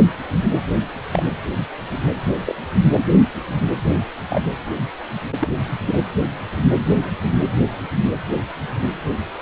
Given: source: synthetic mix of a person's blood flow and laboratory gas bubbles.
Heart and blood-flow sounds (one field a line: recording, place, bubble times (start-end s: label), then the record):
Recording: Doppler ultrasound of blood flow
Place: precordium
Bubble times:
1.13-1.23 s: bubbles
2.46-2.54 s: bubbles
4.30-4.41 s: bubbles
5.41-5.48 s: bubbles
5.86-5.99 s: bubbles
From the record:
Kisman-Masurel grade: 122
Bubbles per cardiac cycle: 1 to 2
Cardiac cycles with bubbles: 10 to 50%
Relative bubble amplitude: moderate (0.250 to 0.450)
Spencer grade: 2 (many but less than half of the cardiac periods contain bubble signals, singularly or in groups)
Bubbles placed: anywhere in the cardiac cycle